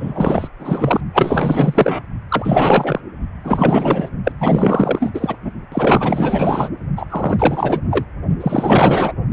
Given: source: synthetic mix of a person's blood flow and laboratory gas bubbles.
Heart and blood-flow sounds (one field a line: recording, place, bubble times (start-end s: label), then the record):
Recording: Doppler ultrasound of blood flow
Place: precordium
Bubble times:
0.00-0.49 s: bubbles
0.59-1.00 s: bubbles
1.14-2.03 s: bubbles
2.29-3.01 s: bubbles
3.43-4.08 s: bubbles
4.24-4.32 s: bubbles
4.40-5.36 s: bubbles
5.42-5.51 s: bubbles
5.72-6.69 s: bubbles
6.96-7.07 s: bubbles
7.10-7.80 s: bubbles
7.90-8.04 s: bubbles
8.40-9.13 s: bubbles
From the record:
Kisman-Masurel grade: 444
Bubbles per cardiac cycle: continuous sound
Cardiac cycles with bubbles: 100%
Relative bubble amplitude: maximal (0.775 to 0.999)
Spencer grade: 4 (maximum detectable bubble signal sounding continuously throughout systole and diastole of every cardiac period, and overriding the amplitude of the normal cardiac signals)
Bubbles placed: only in the low amplitude regions of the cardiac cycle